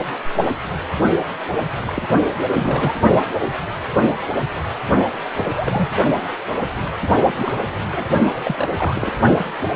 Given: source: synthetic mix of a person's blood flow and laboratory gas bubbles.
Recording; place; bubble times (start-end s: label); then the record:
Doppler ultrasound of blood flow; precordium
1.51-1.58 s: bubbles
1.81-1.93 s: bubbles
1.96-2.02 s: bubbles
2.51-2.98 s: bubbles
5.34-5.90 s: bubbles
7.36-7.71 s: bubbles
7.92-8.05 s: bubbles
8.34-8.68 s: bubbles
8.78-9.19 s: bubbles
From the record:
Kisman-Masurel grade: 222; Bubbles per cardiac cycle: several, 3 to 8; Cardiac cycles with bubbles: 10 to 50%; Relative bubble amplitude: moderate (0.250 to 0.450); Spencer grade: 2 (many but less than half of the cardiac periods contain bubble signals, singularly or in groups); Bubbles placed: only in the low amplitude regions of the cardiac cycle